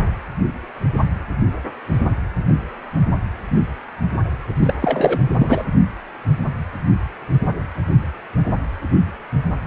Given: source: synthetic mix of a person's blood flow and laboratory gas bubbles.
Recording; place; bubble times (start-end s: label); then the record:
Doppler ultrasound of blood flow; precordium
4.61-4.74 s: bubbles
4.80-5.20 s: bubbles
5.38-5.65 s: bubbles
From the record:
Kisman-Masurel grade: 212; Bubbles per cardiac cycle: several, 3 to 8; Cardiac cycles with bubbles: 1 to 10%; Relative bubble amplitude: moderate (0.250 to 0.450); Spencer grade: 1 (occasional bubble signal discernible with the cardiac motion signal, with majority of cardiac periods free of bubbles); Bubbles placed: anywhere in the cardiac cycle